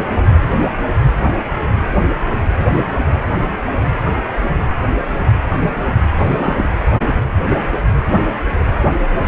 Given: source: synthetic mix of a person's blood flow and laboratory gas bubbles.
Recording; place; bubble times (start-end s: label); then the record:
Doppler ultrasound of blood flow; precordium
6.18-6.71 s: bubbles
From the record:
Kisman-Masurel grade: 213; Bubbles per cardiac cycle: several, 3 to 8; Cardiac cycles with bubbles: 1 to 10%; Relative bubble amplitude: loud (0.450 to 0.775); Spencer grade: 1 (occasional bubble signal discernible with the cardiac motion signal, with majority of cardiac periods free of bubbles); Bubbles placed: anywhere in the cardiac cycle